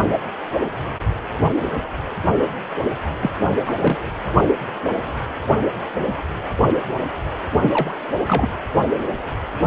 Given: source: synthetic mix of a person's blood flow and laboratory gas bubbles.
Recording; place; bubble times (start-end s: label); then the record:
Doppler ultrasound of blood flow; precordium
3.20-3.30 s: bubbles
3.66-3.75 s: bubbles
3.82-3.98 s: bubbles
7.53-7.59 s: bubbles
7.62-7.94 s: bubbles
8.26-8.47 s: bubbles
From the record:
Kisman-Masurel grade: 223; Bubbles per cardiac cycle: several, 3 to 8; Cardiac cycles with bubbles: 10 to 50%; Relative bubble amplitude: loud (0.450 to 0.775); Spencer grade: 2 (many but less than half of the cardiac periods contain bubble signals, singularly or in groups); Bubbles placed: anywhere in the cardiac cycle